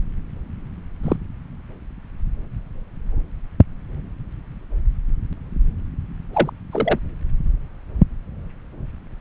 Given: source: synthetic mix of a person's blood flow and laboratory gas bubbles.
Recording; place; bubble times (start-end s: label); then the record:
Doppler ultrasound of blood flow; subclavian vein
1.03-1.17 s: bubbles
6.33-6.50 s: bubbles
6.71-7.00 s: bubbles
From the record:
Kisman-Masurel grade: 122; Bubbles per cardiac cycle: 1 to 2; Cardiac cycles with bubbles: 10 to 50%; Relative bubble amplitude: moderate (0.250 to 0.450); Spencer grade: 2 (many but less than half of the cardiac periods contain bubble signals, singularly or in groups); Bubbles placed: anywhere in the cardiac cycle